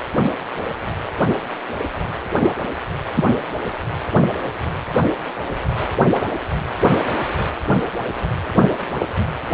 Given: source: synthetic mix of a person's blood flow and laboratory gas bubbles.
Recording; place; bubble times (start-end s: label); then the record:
Doppler ultrasound of blood flow; precordium
3.16-3.25 s: bubbles
From the record:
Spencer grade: 1 (occasional bubble signal discernible with the cardiac motion signal, with majority of cardiac periods free of bubbles); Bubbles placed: anywhere in the cardiac cycle